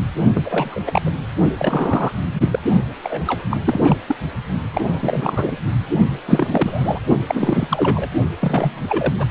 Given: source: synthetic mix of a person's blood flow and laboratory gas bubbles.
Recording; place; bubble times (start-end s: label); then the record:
Doppler ultrasound of blood flow; precordium
0.35-0.81 s: bubbles
0.86-1.02 s: bubbles
1.05-1.10 s: bubbles
1.57-2.12 s: bubbles
2.33-2.48 s: bubbles
2.51-2.59 s: bubbles
3.03-3.42 s: bubbles
3.50-3.57 s: bubbles
3.64-3.98 s: bubbles
4.08-4.16 s: bubbles
4.73-5.57 s: bubbles
6.25-7.00 s: bubbles
7.28-8.09 s: bubbles
8.40-8.86 s: bubbles
8.88-9.14 s: bubbles
9.18-9.25 s: bubbles
From the record:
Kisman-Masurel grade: 333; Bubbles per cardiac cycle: rolling drumbeat, 9 or more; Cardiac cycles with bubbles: 50 to 99%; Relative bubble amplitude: loud (0.450 to 0.775); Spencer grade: 3 (all of the cardiac periods contain showers or single bubble signals, but not dominating or overriding the cardiac motion signals); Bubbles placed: only in the low amplitude regions of the cardiac cycle